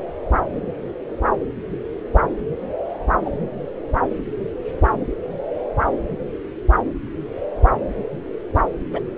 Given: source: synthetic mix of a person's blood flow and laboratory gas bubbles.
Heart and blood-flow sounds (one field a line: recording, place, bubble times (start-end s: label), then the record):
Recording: Doppler ultrasound of blood flow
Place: subclavian vein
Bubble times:
3.25-3.31 s: bubbles
8.92-9.00 s: bubbles
From the record:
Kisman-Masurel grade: 122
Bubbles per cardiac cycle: 1 to 2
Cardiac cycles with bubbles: 10 to 50%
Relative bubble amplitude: moderate (0.250 to 0.450)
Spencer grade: 2 (many but less than half of the cardiac periods contain bubble signals, singularly or in groups)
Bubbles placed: anywhere in the cardiac cycle